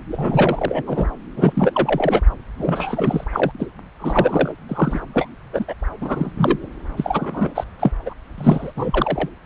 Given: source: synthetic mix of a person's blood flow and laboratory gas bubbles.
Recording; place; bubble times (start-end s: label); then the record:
Doppler ultrasound of blood flow; subclavian vein
0.10-0.82 s: bubbles
0.86-1.07 s: bubbles
1.35-2.21 s: bubbles
2.57-3.24 s: bubbles
3.33-3.51 s: bubbles
3.59-3.67 s: bubbles
4.00-4.54 s: bubbles
4.68-5.00 s: bubbles
5.13-5.28 s: bubbles
5.53-5.65 s: bubbles
5.67-5.74 s: bubbles
6.01-6.33 s: bubbles
6.37-6.69 s: bubbles
6.97-7.64 s: bubbles
7.79-7.92 s: bubbles
8.05-8.13 s: bubbles
8.38-8.72 s: bubbles
8.75-9.29 s: bubbles
From the record:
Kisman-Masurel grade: 343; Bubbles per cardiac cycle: rolling drumbeat, 9 or more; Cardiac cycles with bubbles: 100%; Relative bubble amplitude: loud (0.450 to 0.775); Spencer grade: 3 (all of the cardiac periods contain showers or single bubble signals, but not dominating or overriding the cardiac motion signals); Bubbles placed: anywhere in the cardiac cycle